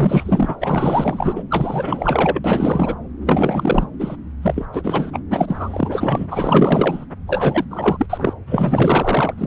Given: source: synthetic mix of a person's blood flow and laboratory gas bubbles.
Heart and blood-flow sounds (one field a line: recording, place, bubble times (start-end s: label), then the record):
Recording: Doppler ultrasound of blood flow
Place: subclavian vein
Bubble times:
0.00-0.56 s: bubbles
0.60-1.43 s: bubbles
1.50-2.40 s: bubbles
2.44-2.96 s: bubbles
3.25-3.86 s: bubbles
3.99-4.16 s: bubbles
4.42-4.66 s: bubbles
4.73-5.20 s: bubbles
5.30-6.28 s: bubbles
6.31-7.05 s: bubbles
7.27-7.64 s: bubbles
7.71-8.06 s: bubbles
8.10-8.34 s: bubbles
8.47-9.34 s: bubbles
9.38-9.47 s: bubbles
From the record:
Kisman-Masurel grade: 444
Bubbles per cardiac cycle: continuous sound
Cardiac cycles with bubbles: 100%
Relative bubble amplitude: maximal (0.775 to 0.999)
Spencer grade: 4 (maximum detectable bubble signal sounding continuously throughout systole and diastole of every cardiac period, and overriding the amplitude of the normal cardiac signals)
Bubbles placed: anywhere in the cardiac cycle